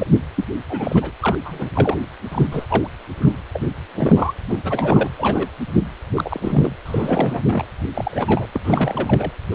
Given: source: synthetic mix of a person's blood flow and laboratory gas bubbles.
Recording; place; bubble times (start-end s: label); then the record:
Doppler ultrasound of blood flow; precordium
0.00-0.06 s: bubbles
0.36-0.45 s: bubbles
0.69-1.12 s: bubbles
1.20-1.39 s: bubbles
1.45-1.70 s: bubbles
1.74-1.96 s: bubbles
2.31-2.47 s: bubbles
2.51-2.65 s: bubbles
2.69-2.87 s: bubbles
3.19-3.32 s: bubbles
3.54-3.60 s: bubbles
3.77-3.81 s: bubbles
3.95-4.33 s: bubbles
4.50-5.10 s: bubbles
5.17-5.49 s: bubbles
6.14-6.72 s: bubbles
6.85-7.43 s: bubbles
7.48-7.65 s: bubbles
7.94-8.46 s: bubbles
8.54-8.61 s: bubbles
8.63-9.32 s: bubbles
9.51-9.55 s: bubbles
From the record:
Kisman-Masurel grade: 242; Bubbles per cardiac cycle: several, 3 to 8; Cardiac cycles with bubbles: 100%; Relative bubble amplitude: moderate (0.250 to 0.450); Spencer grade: 3 (all of the cardiac periods contain showers or single bubble signals, but not dominating or overriding the cardiac motion signals); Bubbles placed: anywhere in the cardiac cycle